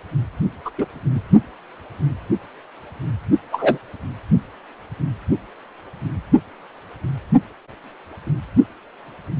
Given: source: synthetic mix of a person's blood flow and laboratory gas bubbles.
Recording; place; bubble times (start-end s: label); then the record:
Doppler ultrasound of blood flow; precordium
0.65-0.71 s: bubbles
0.78-0.85 s: bubbles
3.52-3.79 s: bubbles
From the record:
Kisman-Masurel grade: 123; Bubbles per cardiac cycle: 1 to 2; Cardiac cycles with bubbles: 10 to 50%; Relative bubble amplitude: loud (0.450 to 0.775); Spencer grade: 2 (many but less than half of the cardiac periods contain bubble signals, singularly or in groups); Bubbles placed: only in the low amplitude regions of the cardiac cycle